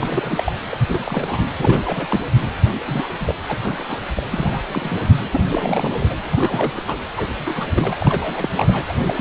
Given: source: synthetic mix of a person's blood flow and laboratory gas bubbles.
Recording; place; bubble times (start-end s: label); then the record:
Doppler ultrasound of blood flow; precordium
0.00-0.52 s: bubbles
0.70-0.77 s: bubbles
0.89-1.48 s: bubbles
1.58-2.20 s: bubbles
2.75-2.79 s: bubbles
2.87-3.13 s: bubbles
3.25-3.35 s: bubbles
3.48-3.60 s: bubbles
3.62-3.99 s: bubbles
4.15-4.27 s: bubbles
4.31-4.62 s: bubbles
4.67-4.96 s: bubbles
5.01-5.09 s: bubbles
5.20-5.29 s: bubbles
5.31-5.41 s: bubbles
5.50-6.17 s: bubbles
6.21-6.98 s: bubbles
7.17-7.27 s: bubbles
7.38-8.49 s: bubbles
8.55-8.85 s: bubbles
8.88-9.04 s: bubbles
9.07-9.21 s: bubbles
From the record:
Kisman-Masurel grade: 342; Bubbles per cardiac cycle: rolling drumbeat, 9 or more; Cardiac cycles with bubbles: 100%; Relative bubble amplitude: moderate (0.250 to 0.450); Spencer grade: 3 (all of the cardiac periods contain showers or single bubble signals, but not dominating or overriding the cardiac motion signals); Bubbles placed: anywhere in the cardiac cycle